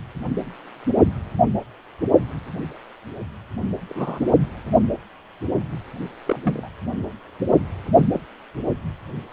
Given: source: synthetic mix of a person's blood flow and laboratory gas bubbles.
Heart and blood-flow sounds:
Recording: Doppler ultrasound of blood flow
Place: precordium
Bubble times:
3.89-4.27 s: bubbles
6.26-6.39 s: bubbles
6.43-6.68 s: bubbles
8.14-8.20 s: bubbles
From the record:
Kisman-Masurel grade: 121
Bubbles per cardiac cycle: 1 to 2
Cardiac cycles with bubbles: 10 to 50%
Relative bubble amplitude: barely perceptible (0.100 to 0.250)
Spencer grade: 2 (many but less than half of the cardiac periods contain bubble signals, singularly or in groups)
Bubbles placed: only in the low amplitude regions of the cardiac cycle

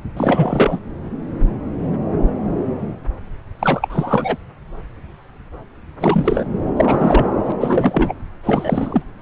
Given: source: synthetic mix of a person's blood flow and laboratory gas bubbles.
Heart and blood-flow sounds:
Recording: Doppler ultrasound of blood flow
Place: subclavian vein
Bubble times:
0.16-0.78 s: bubbles
3.59-4.37 s: bubbles
6.00-6.47 s: bubbles
6.76-7.29 s: bubbles
7.44-7.53 s: bubbles
7.61-8.13 s: bubbles
8.43-9.03 s: bubbles
From the record:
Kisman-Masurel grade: 333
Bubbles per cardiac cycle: rolling drumbeat, 9 or more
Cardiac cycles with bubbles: 50 to 99%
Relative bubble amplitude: loud (0.450 to 0.775)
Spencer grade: 3 (all of the cardiac periods contain showers or single bubble signals, but not dominating or overriding the cardiac motion signals)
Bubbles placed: anywhere in the cardiac cycle

